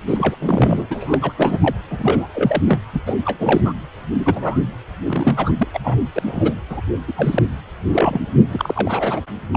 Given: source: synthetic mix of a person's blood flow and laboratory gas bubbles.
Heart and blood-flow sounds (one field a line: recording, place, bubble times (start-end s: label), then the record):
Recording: Doppler ultrasound of blood flow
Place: precordium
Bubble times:
0.07-0.36 s: bubbles
0.40-0.86 s: bubbles
0.90-1.18 s: bubbles
1.21-1.33 s: bubbles
1.37-1.58 s: bubbles
1.61-1.75 s: bubbles
1.90-2.27 s: bubbles
2.34-2.61 s: bubbles
2.67-2.79 s: bubbles
2.93-3.01 s: bubbles
3.06-3.17 s: bubbles
3.25-3.61 s: bubbles
3.65-3.74 s: bubbles
4.18-4.59 s: bubbles
5.03-5.51 s: bubbles
5.58-5.67 s: bubbles
5.74-5.79 s: bubbles
5.84-5.96 s: bubbles
6.14-6.22 s: bubbles
6.25-6.55 s: bubbles
6.70-6.81 s: bubbles
7.08-7.13 s: bubbles
7.17-7.42 s: bubbles
7.93-8.20 s: bubbles
8.49-9.21 s: bubbles
9.52-9.57 s: bubbles
From the record:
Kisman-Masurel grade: 342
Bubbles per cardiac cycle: rolling drumbeat, 9 or more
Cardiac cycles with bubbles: 100%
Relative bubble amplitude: moderate (0.250 to 0.450)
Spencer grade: 3 (all of the cardiac periods contain showers or single bubble signals, but not dominating or overriding the cardiac motion signals)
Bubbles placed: anywhere in the cardiac cycle